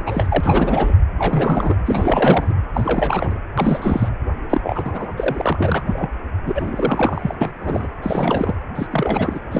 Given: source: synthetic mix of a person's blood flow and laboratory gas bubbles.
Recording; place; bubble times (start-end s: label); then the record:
Doppler ultrasound of blood flow; precordium
0.00-0.95 s: bubbles
1.17-1.76 s: bubbles
1.86-2.54 s: bubbles
2.74-3.38 s: bubbles
3.57-4.08 s: bubbles
4.50-5.13 s: bubbles
5.17-6.10 s: bubbles
6.46-7.35 s: bubbles
7.41-7.51 s: bubbles
7.61-7.88 s: bubbles
8.02-8.54 s: bubbles
8.75-8.87 s: bubbles
8.90-9.40 s: bubbles
9.50-9.60 s: bubbles
From the record:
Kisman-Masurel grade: 343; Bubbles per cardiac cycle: rolling drumbeat, 9 or more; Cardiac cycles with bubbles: 100%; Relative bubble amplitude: loud (0.450 to 0.775); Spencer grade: 3 (all of the cardiac periods contain showers or single bubble signals, but not dominating or overriding the cardiac motion signals); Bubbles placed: anywhere in the cardiac cycle